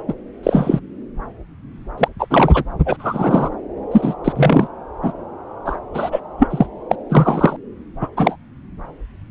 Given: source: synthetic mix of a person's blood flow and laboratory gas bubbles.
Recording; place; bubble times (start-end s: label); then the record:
Doppler ultrasound of blood flow; subclavian vein
0.08-0.14 s: bubbles
0.43-0.79 s: bubbles
1.97-2.08 s: bubbles
2.19-2.26 s: bubbles
2.30-2.63 s: bubbles
2.85-3.50 s: bubbles
3.92-4.14 s: bubbles
4.24-4.33 s: bubbles
4.35-4.67 s: bubbles
5.02-5.12 s: bubbles
5.65-5.78 s: bubbles
5.94-6.20 s: bubbles
6.38-6.47 s: bubbles
6.50-6.67 s: bubbles
6.90-6.96 s: bubbles
7.09-7.56 s: bubbles
8.00-8.08 s: bubbles
8.16-8.36 s: bubbles
From the record:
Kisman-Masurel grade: 233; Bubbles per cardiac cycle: several, 3 to 8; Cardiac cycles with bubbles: 50 to 99%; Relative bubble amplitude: loud (0.450 to 0.775); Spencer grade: 3 (all of the cardiac periods contain showers or single bubble signals, but not dominating or overriding the cardiac motion signals); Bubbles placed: anywhere in the cardiac cycle